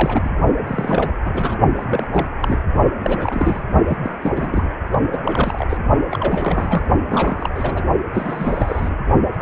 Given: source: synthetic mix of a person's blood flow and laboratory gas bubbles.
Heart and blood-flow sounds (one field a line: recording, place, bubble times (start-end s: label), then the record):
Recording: Doppler ultrasound of blood flow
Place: precordium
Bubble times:
0.00-0.30 s: bubbles
0.67-1.12 s: bubbles
1.25-1.58 s: bubbles
1.76-2.06 s: bubbles
2.12-2.27 s: bubbles
2.40-2.61 s: bubbles
2.99-3.66 s: bubbles
3.89-3.97 s: bubbles
4.03-4.14 s: bubbles
4.21-4.71 s: bubbles
4.90-4.98 s: bubbles
5.11-5.21 s: bubbles
5.24-5.77 s: bubbles
6.08-6.86 s: bubbles
7.08-7.50 s: bubbles
7.54-7.83 s: bubbles
8.12-8.99 s: bubbles
9.33-9.42 s: bubbles
From the record:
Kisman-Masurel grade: 342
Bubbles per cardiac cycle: rolling drumbeat, 9 or more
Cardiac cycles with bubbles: 100%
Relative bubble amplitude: moderate (0.250 to 0.450)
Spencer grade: 3 (all of the cardiac periods contain showers or single bubble signals, but not dominating or overriding the cardiac motion signals)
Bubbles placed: only in the low amplitude regions of the cardiac cycle